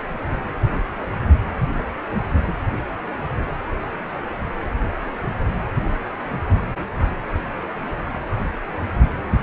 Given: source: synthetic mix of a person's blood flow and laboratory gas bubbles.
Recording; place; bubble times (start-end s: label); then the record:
Doppler ultrasound of blood flow; precordium
no bubbles
From the record:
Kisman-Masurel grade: 000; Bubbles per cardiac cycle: 0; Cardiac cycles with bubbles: 0%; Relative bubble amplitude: no bubbles discernible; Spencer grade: 0 (complete lack of bubble signals)